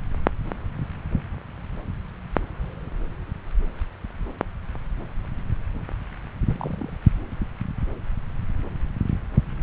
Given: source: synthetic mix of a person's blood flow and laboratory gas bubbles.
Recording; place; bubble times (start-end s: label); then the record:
Doppler ultrasound of blood flow; subclavian vein
6.46-6.90 s: bubbles
From the record:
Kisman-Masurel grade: 111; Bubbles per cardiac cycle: 1 to 2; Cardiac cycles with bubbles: 1 to 10%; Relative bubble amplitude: barely perceptible (0.100 to 0.250); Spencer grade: 1 (occasional bubble signal discernible with the cardiac motion signal, with majority of cardiac periods free of bubbles); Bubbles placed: anywhere in the cardiac cycle